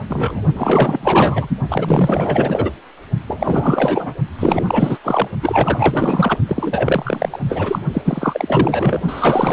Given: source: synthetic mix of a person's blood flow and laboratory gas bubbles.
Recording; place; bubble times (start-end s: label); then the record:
Doppler ultrasound of blood flow; precordium
0.09-0.42 s: bubbles
0.53-1.48 s: bubbles
1.68-2.71 s: bubbles
3.27-4.15 s: bubbles
4.39-4.98 s: bubbles
5.04-5.29 s: bubbles
5.42-6.37 s: bubbles
6.48-7.40 s: bubbles
7.45-7.79 s: bubbles
7.93-8.02 s: bubbles
8.04-9.01 s: bubbles
9.08-9.52 s: bubbles
From the record:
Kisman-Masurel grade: 444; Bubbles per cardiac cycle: continuous sound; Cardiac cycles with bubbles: 100%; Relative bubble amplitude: maximal (0.775 to 0.999); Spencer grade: 4 (maximum detectable bubble signal sounding continuously throughout systole and diastole of every cardiac period, and overriding the amplitude of the normal cardiac signals); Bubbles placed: only in the low amplitude regions of the cardiac cycle